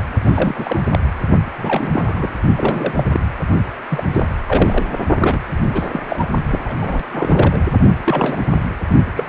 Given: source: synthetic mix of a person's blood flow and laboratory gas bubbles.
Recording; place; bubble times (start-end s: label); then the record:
Doppler ultrasound of blood flow; precordium
0.00-0.02 s: bubbles
0.24-0.80 s: bubbles
0.93-0.99 s: bubbles
1.57-2.35 s: bubbles
2.56-3.04 s: bubbles
3.12-3.20 s: bubbles
3.89-4.03 s: bubbles
4.12-4.26 s: bubbles
4.46-5.04 s: bubbles
5.16-5.39 s: bubbles
5.62-5.89 s: bubbles
5.92-6.00 s: bubbles
6.08-6.27 s: bubbles
6.50-6.58 s: bubbles
6.65-6.74 s: bubbles
6.79-7.03 s: bubbles
7.11-7.77 s: bubbles
8.04-8.46 s: bubbles
8.53-8.62 s: bubbles
9.13-9.29 s: bubbles
From the record:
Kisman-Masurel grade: 342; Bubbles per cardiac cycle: rolling drumbeat, 9 or more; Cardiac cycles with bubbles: 100%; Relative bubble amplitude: moderate (0.250 to 0.450); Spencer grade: 3 (all of the cardiac periods contain showers or single bubble signals, but not dominating or overriding the cardiac motion signals); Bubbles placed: only in the low amplitude regions of the cardiac cycle